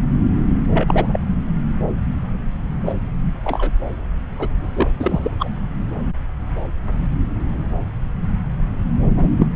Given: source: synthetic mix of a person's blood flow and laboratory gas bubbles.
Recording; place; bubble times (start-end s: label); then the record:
Doppler ultrasound of blood flow; subclavian vein
0.73-1.20 s: bubbles
2.85-2.92 s: bubbles
3.44-3.71 s: bubbles
4.38-4.48 s: bubbles
4.58-4.90 s: bubbles
5.00-5.31 s: bubbles
5.39-5.49 s: bubbles
9.16-9.29 s: bubbles
9.40-9.46 s: bubbles
From the record:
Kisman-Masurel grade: 232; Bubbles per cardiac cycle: several, 3 to 8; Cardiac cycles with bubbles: 50 to 99%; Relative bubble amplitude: moderate (0.250 to 0.450); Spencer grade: 3 (all of the cardiac periods contain showers or single bubble signals, but not dominating or overriding the cardiac motion signals); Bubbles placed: anywhere in the cardiac cycle